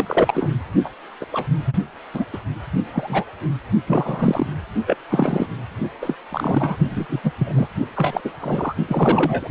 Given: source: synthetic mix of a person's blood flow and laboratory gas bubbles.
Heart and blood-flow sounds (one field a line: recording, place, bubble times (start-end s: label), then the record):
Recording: Doppler ultrasound of blood flow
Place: precordium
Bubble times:
0.00-0.51 s: bubbles
0.84-0.89 s: bubbles
1.20-1.25 s: bubbles
1.32-1.48 s: bubbles
1.66-1.73 s: bubbles
2.14-2.25 s: bubbles
2.33-2.38 s: bubbles
2.94-3.24 s: bubbles
3.87-4.52 s: bubbles
4.87-4.95 s: bubbles
5.10-5.46 s: bubbles
6.01-6.15 s: bubbles
6.31-6.76 s: bubbles
6.90-7.05 s: bubbles
7.09-7.20 s: bubbles
7.23-7.31 s: bubbles
7.38-7.67 s: bubbles
7.94-8.21 s: bubbles
8.24-8.31 s: bubbles
8.39-8.75 s: bubbles
8.88-9.50 s: bubbles
From the record:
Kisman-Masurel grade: 242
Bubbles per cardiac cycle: several, 3 to 8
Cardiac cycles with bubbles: 100%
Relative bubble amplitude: moderate (0.250 to 0.450)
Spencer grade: 3 (all of the cardiac periods contain showers or single bubble signals, but not dominating or overriding the cardiac motion signals)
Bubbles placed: only in the low amplitude regions of the cardiac cycle